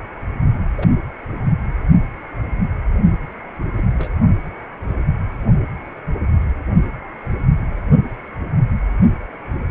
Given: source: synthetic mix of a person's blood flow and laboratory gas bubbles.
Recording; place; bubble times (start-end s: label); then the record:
Doppler ultrasound of blood flow; precordium
0.78-0.90 s: bubbles
3.78-3.83 s: bubbles
3.97-4.14 s: bubbles
4.80-5.04 s: bubbles
From the record:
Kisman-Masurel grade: 121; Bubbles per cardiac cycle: 1 to 2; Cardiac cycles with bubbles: 10 to 50%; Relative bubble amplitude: barely perceptible (0.100 to 0.250); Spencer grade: 2 (many but less than half of the cardiac periods contain bubble signals, singularly or in groups); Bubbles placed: only in the low amplitude regions of the cardiac cycle